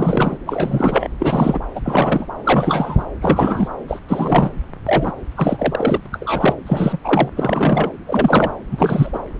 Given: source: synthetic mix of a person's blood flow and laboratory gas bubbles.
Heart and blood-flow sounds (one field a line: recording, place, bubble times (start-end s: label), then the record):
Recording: Doppler ultrasound of blood flow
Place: subclavian vein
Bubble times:
0.00-0.37 s: bubbles
0.46-1.08 s: bubbles
1.19-1.60 s: bubbles
1.75-2.27 s: bubbles
2.44-3.04 s: bubbles
3.21-3.68 s: bubbles
3.88-4.00 s: bubbles
4.08-4.51 s: bubbles
4.85-5.12 s: bubbles
5.37-6.00 s: bubbles
6.05-6.08 s: bubbles
6.12-6.54 s: bubbles
6.67-6.97 s: bubbles
7.04-7.29 s: bubbles
7.37-7.90 s: bubbles
8.06-8.51 s: bubbles
8.70-9.19 s: bubbles
From the record:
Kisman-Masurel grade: 343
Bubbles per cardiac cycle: rolling drumbeat, 9 or more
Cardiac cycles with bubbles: 100%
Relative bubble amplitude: loud (0.450 to 0.775)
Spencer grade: 3 (all of the cardiac periods contain showers or single bubble signals, but not dominating or overriding the cardiac motion signals)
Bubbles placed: anywhere in the cardiac cycle